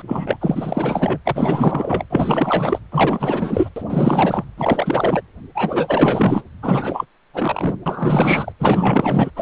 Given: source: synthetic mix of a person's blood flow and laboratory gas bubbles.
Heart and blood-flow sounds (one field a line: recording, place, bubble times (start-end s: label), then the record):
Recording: Doppler ultrasound of blood flow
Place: precordium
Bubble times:
0.00-0.02 s: bubbles
0.07-0.37 s: bubbles
0.40-1.19 s: bubbles
1.25-2.05 s: bubbles
2.10-2.79 s: bubbles
2.91-3.70 s: bubbles
3.76-4.44 s: bubbles
4.58-5.21 s: bubbles
5.54-6.42 s: bubbles
6.62-7.04 s: bubbles
7.33-7.75 s: bubbles
7.86-8.53 s: bubbles
8.60-9.30 s: bubbles
9.36-9.42 s: bubbles
From the record:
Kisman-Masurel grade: 444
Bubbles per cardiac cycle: continuous sound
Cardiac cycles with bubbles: 100%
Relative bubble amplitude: maximal (0.775 to 0.999)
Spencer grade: 4 (maximum detectable bubble signal sounding continuously throughout systole and diastole of every cardiac period, and overriding the amplitude of the normal cardiac signals)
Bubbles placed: anywhere in the cardiac cycle